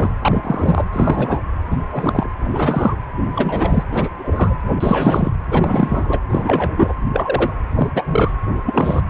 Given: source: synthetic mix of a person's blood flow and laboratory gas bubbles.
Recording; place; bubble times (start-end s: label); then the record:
Doppler ultrasound of blood flow; precordium
0.00-0.09 s: bubbles
0.21-0.40 s: bubbles
0.43-0.84 s: bubbles
0.92-1.40 s: bubbles
1.71-1.77 s: bubbles
1.92-2.27 s: bubbles
2.40-2.96 s: bubbles
3.21-3.83 s: bubbles
3.91-4.09 s: bubbles
4.18-4.54 s: bubbles
4.80-5.31 s: bubbles
5.51-6.20 s: bubbles
6.29-6.74 s: bubbles
6.77-6.93 s: bubbles
7.13-7.50 s: bubbles
7.71-7.90 s: bubbles
7.95-8.31 s: bubbles
8.65-9.02 s: bubbles
From the record:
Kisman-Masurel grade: 243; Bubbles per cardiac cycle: several, 3 to 8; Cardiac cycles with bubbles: 100%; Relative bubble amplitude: loud (0.450 to 0.775); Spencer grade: 3 (all of the cardiac periods contain showers or single bubble signals, but not dominating or overriding the cardiac motion signals); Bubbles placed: anywhere in the cardiac cycle